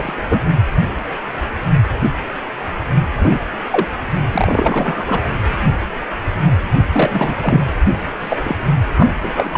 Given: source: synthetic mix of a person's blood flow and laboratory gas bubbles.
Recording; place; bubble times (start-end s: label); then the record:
Doppler ultrasound of blood flow; precordium
0.00-0.11 s: bubbles
0.30-0.41 s: bubbles
3.19-3.39 s: bubbles
3.71-3.88 s: bubbles
4.32-5.21 s: bubbles
6.92-7.35 s: bubbles
7.41-7.65 s: bubbles
8.21-8.37 s: bubbles
8.44-8.56 s: bubbles
8.96-9.58 s: bubbles
From the record:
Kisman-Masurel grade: 233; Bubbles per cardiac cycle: several, 3 to 8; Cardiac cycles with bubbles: 50 to 99%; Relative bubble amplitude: loud (0.450 to 0.775); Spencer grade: 3 (all of the cardiac periods contain showers or single bubble signals, but not dominating or overriding the cardiac motion signals); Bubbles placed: only in the low amplitude regions of the cardiac cycle